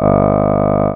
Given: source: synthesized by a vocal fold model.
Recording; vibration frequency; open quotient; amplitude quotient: sustained vowel; 50 Hz; 0.2; 1